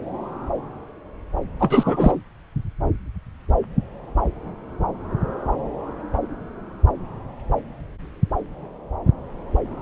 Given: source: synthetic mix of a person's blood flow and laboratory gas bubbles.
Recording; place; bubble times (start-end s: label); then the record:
Doppler ultrasound of blood flow; subclavian vein
1.59-2.17 s: bubbles
From the record:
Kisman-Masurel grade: 213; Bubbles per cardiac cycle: several, 3 to 8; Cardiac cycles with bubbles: 1 to 10%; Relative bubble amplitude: loud (0.450 to 0.775); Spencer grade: 1 (occasional bubble signal discernible with the cardiac motion signal, with majority of cardiac periods free of bubbles); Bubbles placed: anywhere in the cardiac cycle